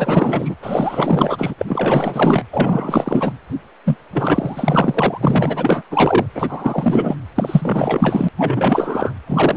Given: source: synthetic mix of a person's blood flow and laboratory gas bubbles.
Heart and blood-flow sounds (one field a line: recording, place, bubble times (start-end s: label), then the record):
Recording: Doppler ultrasound of blood flow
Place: precordium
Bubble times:
0.00-0.56 s: bubbles
0.62-1.54 s: bubbles
1.58-2.46 s: bubbles
2.51-3.33 s: bubbles
3.85-3.97 s: bubbles
4.11-5.82 s: bubbles
5.90-6.26 s: bubbles
6.34-7.15 s: bubbles
7.34-8.29 s: bubbles
8.38-9.12 s: bubbles
9.27-9.57 s: bubbles
From the record:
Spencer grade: 4 (maximum detectable bubble signal sounding continuously throughout systole and diastole of every cardiac period, and overriding the amplitude of the normal cardiac signals)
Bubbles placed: anywhere in the cardiac cycle